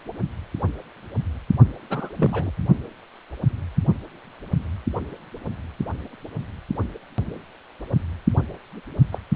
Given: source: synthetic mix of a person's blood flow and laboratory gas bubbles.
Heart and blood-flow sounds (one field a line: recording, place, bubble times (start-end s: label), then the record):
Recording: Doppler ultrasound of blood flow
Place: precordium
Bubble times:
1.90-2.51 s: bubbles
9.12-9.18 s: bubbles
From the record:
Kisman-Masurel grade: 222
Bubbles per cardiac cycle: several, 3 to 8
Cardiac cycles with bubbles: 10 to 50%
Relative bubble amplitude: moderate (0.250 to 0.450)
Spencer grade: 2 (many but less than half of the cardiac periods contain bubble signals, singularly or in groups)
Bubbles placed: only in the low amplitude regions of the cardiac cycle